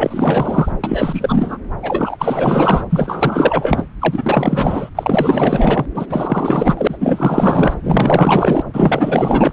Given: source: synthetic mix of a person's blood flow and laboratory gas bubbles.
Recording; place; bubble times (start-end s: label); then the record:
Doppler ultrasound of blood flow; subclavian vein
0.00-0.72 s: bubbles
0.83-1.58 s: bubbles
1.82-2.84 s: bubbles
2.90-3.84 s: bubbles
4.00-4.89 s: bubbles
4.95-5.85 s: bubbles
5.94-6.06 s: bubbles
6.09-6.97 s: bubbles
7.00-7.74 s: bubbles
7.83-8.64 s: bubbles
8.73-9.52 s: bubbles
From the record:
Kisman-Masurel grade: 444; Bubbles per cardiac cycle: continuous sound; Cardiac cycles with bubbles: 100%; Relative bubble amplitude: maximal (0.775 to 0.999); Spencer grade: 4 (maximum detectable bubble signal sounding continuously throughout systole and diastole of every cardiac period, and overriding the amplitude of the normal cardiac signals); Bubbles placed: anywhere in the cardiac cycle